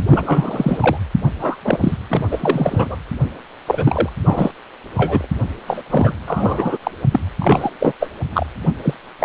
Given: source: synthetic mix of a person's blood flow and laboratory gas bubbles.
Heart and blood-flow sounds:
Doppler ultrasound of blood flow; precordium
0.07-0.97 s: bubbles
1.40-1.56 s: bubbles
1.65-1.78 s: bubbles
1.81-1.97 s: bubbles
2.10-2.25 s: bubbles
2.31-2.96 s: bubbles
3.67-4.09 s: bubbles
4.25-4.51 s: bubbles
4.96-5.26 s: bubbles
5.67-5.82 s: bubbles
5.86-6.15 s: bubbles
6.27-6.77 s: bubbles
6.83-6.91 s: bubbles
7.11-7.19 s: bubbles
7.39-7.70 s: bubbles
7.79-7.93 s: bubbles
8.00-8.09 s: bubbles
8.32-8.46 s: bubbles
8.83-8.94 s: bubbles
9.19-9.25 s: bubbles
From the record:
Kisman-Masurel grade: 243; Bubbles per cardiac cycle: several, 3 to 8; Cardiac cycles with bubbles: 100%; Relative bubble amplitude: loud (0.450 to 0.775); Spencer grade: 3 (all of the cardiac periods contain showers or single bubble signals, but not dominating or overriding the cardiac motion signals); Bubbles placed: anywhere in the cardiac cycle

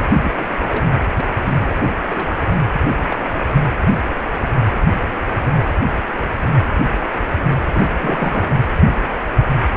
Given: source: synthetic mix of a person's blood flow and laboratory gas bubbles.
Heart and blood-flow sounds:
Doppler ultrasound of blood flow; precordium
0.02-0.04 s: bubbles
0.11-0.32 s: bubbles
0.36-0.44 s: bubbles
0.69-0.84 s: bubbles
1.59-1.81 s: bubbles
2.03-2.47 s: bubbles
3.10-3.15 s: bubbles
3.25-3.29 s: bubbles
3.55-3.59 s: bubbles
7.72-7.88 s: bubbles
8.01-8.48 s: bubbles
From the record:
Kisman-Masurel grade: 222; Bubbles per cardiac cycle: several, 3 to 8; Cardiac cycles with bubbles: 10 to 50%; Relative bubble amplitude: moderate (0.250 to 0.450); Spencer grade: 2 (many but less than half of the cardiac periods contain bubble signals, singularly or in groups); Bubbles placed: anywhere in the cardiac cycle

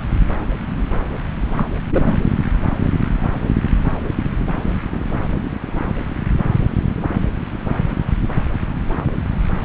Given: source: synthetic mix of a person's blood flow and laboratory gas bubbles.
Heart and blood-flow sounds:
Doppler ultrasound of blood flow; subclavian vein
1.54-1.65 s: bubbles
1.91-2.17 s: bubbles
From the record:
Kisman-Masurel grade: 212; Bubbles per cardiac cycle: several, 3 to 8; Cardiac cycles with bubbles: 1 to 10%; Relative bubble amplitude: moderate (0.250 to 0.450); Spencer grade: 1 (occasional bubble signal discernible with the cardiac motion signal, with majority of cardiac periods free of bubbles); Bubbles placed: anywhere in the cardiac cycle

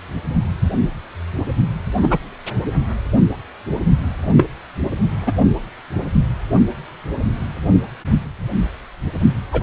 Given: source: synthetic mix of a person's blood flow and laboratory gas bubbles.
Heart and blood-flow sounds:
Doppler ultrasound of blood flow; precordium
2.02-2.19 s: bubbles
4.37-4.45 s: bubbles
5.18-5.34 s: bubbles
9.51-9.63 s: bubbles
From the record:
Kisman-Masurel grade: 123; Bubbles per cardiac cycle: 1 to 2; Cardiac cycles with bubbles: 10 to 50%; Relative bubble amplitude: loud (0.450 to 0.775); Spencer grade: 2 (many but less than half of the cardiac periods contain bubble signals, singularly or in groups); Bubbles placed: only in the low amplitude regions of the cardiac cycle

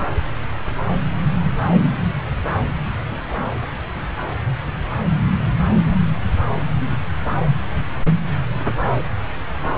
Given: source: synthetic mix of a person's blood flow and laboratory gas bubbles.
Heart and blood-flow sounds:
Doppler ultrasound of blood flow; subclavian vein
3.08-3.51 s: bubbles
From the record:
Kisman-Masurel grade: 111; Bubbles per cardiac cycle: 1 to 2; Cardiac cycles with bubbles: 1 to 10%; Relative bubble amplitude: barely perceptible (0.100 to 0.250); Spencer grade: 1 (occasional bubble signal discernible with the cardiac motion signal, with majority of cardiac periods free of bubbles); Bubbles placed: anywhere in the cardiac cycle

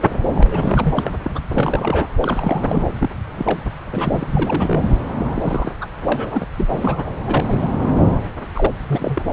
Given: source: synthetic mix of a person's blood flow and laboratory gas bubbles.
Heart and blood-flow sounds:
Doppler ultrasound of blood flow; subclavian vein
0.35-1.12 s: bubbles
1.23-1.40 s: bubbles
1.54-2.08 s: bubbles
2.21-2.60 s: bubbles
2.68-2.88 s: bubbles
2.99-3.09 s: bubbles
3.36-3.65 s: bubbles
3.91-4.27 s: bubbles
4.32-4.84 s: bubbles
5.18-5.72 s: bubbles
5.81-5.87 s: bubbles
6.07-6.47 s: bubbles
6.57-6.67 s: bubbles
6.70-7.10 s: bubbles
7.27-7.72 s: bubbles
8.05-8.15 s: bubbles
8.55-8.66 s: bubbles
8.88-9.22 s: bubbles
From the record:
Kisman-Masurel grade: 242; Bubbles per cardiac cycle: several, 3 to 8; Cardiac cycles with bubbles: 100%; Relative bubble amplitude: moderate (0.250 to 0.450); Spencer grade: 3 (all of the cardiac periods contain showers or single bubble signals, but not dominating or overriding the cardiac motion signals); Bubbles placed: anywhere in the cardiac cycle

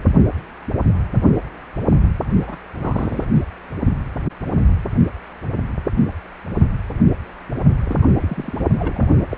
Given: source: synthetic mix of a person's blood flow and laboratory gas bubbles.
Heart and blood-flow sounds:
Doppler ultrasound of blood flow; precordium
2.47-2.57 s: bubbles
2.80-3.25 s: bubbles
3.34-3.44 s: bubbles
7.86-7.96 s: bubbles
8.02-8.06 s: bubbles
8.17-8.68 s: bubbles
8.79-9.06 s: bubbles
9.29-9.38 s: bubbles
From the record:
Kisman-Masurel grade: 221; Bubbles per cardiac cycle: several, 3 to 8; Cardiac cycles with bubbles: 10 to 50%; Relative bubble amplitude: barely perceptible (0.100 to 0.250); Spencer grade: 2 (many but less than half of the cardiac periods contain bubble signals, singularly or in groups); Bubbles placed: only in the low amplitude regions of the cardiac cycle

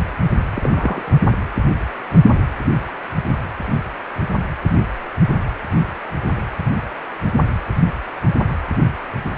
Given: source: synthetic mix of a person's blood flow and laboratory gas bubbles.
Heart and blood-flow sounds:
Doppler ultrasound of blood flow; precordium
0.55-1.20 s: bubbles
From the record:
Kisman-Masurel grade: 113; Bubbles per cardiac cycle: 1 to 2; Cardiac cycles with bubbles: 1 to 10%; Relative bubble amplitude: loud (0.450 to 0.775); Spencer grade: 1 (occasional bubble signal discernible with the cardiac motion signal, with majority of cardiac periods free of bubbles); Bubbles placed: anywhere in the cardiac cycle

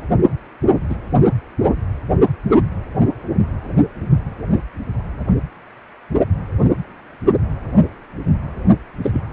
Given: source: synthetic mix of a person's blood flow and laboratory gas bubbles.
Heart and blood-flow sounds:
Doppler ultrasound of blood flow; precordium
0.89-0.95 s: bubbles
9.03-9.21 s: bubbles
From the record:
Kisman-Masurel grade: 122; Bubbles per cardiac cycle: 1 to 2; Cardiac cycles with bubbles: 10 to 50%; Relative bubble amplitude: moderate (0.250 to 0.450); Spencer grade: 2 (many but less than half of the cardiac periods contain bubble signals, singularly or in groups); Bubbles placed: anywhere in the cardiac cycle

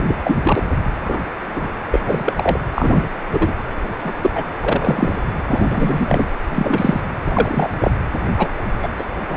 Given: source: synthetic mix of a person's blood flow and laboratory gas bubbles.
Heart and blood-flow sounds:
Doppler ultrasound of blood flow; precordium
0.00-0.03 s: bubbles
0.07-0.18 s: bubbles
0.23-0.39 s: bubbles
0.43-0.63 s: bubbles
1.01-1.18 s: bubbles
1.55-1.68 s: bubbles
1.91-2.00 s: bubbles
2.04-2.60 s: bubbles
2.75-3.10 s: bubbles
3.33-3.52 s: bubbles
4.04-4.13 s: bubbles
4.21-4.30 s: bubbles
4.34-4.46 s: bubbles
4.60-5.19 s: bubbles
5.46-6.27 s: bubbles
6.48-7.01 s: bubbles
7.25-7.70 s: bubbles
7.81-7.92 s: bubbles
8.38-8.49 s: bubbles
8.82-8.88 s: bubbles
8.96-9.04 s: bubbles
9.28-9.36 s: bubbles
From the record:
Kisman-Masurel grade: 243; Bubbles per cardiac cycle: several, 3 to 8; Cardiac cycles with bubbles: 100%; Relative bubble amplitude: loud (0.450 to 0.775); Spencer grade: 3 (all of the cardiac periods contain showers or single bubble signals, but not dominating or overriding the cardiac motion signals); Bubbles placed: anywhere in the cardiac cycle

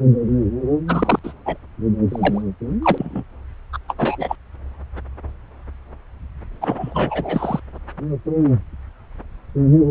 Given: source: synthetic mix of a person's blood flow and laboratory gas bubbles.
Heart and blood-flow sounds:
Doppler ultrasound of blood flow; subclavian vein
0.88-1.19 s: bubbles
1.23-1.33 s: bubbles
1.46-1.57 s: bubbles
2.08-2.42 s: bubbles
2.82-3.24 s: bubbles
3.73-3.78 s: bubbles
3.88-3.96 s: bubbles
3.98-4.36 s: bubbles
6.61-7.60 s: bubbles
From the record:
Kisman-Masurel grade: 223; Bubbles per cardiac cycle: several, 3 to 8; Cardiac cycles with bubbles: 10 to 50%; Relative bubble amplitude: loud (0.450 to 0.775); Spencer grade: 2 (many but less than half of the cardiac periods contain bubble signals, singularly or in groups); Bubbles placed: anywhere in the cardiac cycle

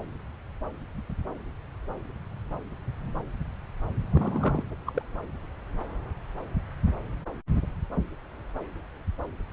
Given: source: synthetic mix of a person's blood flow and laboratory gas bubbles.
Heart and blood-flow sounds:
Doppler ultrasound of blood flow; subclavian vein
4.12-4.64 s: bubbles
4.86-5.02 s: bubbles
From the record:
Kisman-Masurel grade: 122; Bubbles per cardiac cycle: 1 to 2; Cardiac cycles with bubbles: 10 to 50%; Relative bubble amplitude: moderate (0.250 to 0.450); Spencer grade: 2 (many but less than half of the cardiac periods contain bubble signals, singularly or in groups); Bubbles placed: anywhere in the cardiac cycle

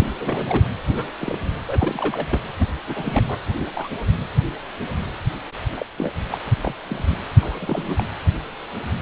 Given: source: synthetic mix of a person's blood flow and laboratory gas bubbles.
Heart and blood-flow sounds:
Doppler ultrasound of blood flow; precordium
0.00-0.66 s: bubbles
0.87-1.10 s: bubbles
1.20-1.36 s: bubbles
1.66-2.40 s: bubbles
2.59-2.67 s: bubbles
2.87-3.25 s: bubbles
3.28-3.38 s: bubbles
3.59-3.69 s: bubbles
3.74-3.91 s: bubbles
5.76-5.86 s: bubbles
5.97-6.12 s: bubbles
6.31-6.38 s: bubbles
6.44-6.74 s: bubbles
6.83-7.19 s: bubbles
7.40-8.04 s: bubbles
From the record:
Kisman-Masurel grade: 232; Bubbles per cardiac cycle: several, 3 to 8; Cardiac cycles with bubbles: 50 to 99%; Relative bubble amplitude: moderate (0.250 to 0.450); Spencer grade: 3 (all of the cardiac periods contain showers or single bubble signals, but not dominating or overriding the cardiac motion signals); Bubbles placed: anywhere in the cardiac cycle

